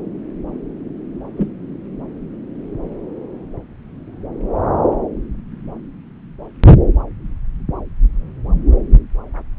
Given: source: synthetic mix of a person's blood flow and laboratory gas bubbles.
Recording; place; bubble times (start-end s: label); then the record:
Doppler ultrasound of blood flow; subclavian vein
1.37-1.49 s: bubbles
From the record:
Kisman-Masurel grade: 112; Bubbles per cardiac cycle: 1 to 2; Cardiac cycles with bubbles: 1 to 10%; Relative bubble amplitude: moderate (0.250 to 0.450); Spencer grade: 1 (occasional bubble signal discernible with the cardiac motion signal, with majority of cardiac periods free of bubbles); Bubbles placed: anywhere in the cardiac cycle